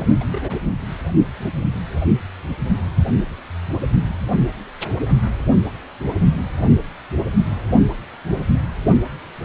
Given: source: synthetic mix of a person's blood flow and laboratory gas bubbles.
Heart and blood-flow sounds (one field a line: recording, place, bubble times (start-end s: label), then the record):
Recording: Doppler ultrasound of blood flow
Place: precordium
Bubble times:
0.00-0.07 s: bubbles
0.10-0.25 s: bubbles
0.30-0.59 s: bubbles
From the record:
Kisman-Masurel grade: 221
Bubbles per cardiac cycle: several, 3 to 8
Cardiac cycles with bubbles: 10 to 50%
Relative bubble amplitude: barely perceptible (0.100 to 0.250)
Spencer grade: 2 (many but less than half of the cardiac periods contain bubble signals, singularly or in groups)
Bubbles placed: only in the low amplitude regions of the cardiac cycle